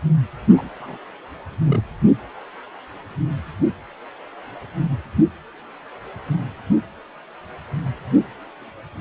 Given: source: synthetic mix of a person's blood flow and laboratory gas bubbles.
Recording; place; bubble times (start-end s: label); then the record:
Doppler ultrasound of blood flow; precordium
0.56-0.69 s: bubbles
0.79-0.98 s: bubbles
1.64-1.82 s: bubbles
From the record:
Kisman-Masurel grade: 221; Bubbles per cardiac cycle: several, 3 to 8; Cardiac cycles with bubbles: 10 to 50%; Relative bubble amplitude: barely perceptible (0.100 to 0.250); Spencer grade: 2 (many but less than half of the cardiac periods contain bubble signals, singularly or in groups); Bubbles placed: anywhere in the cardiac cycle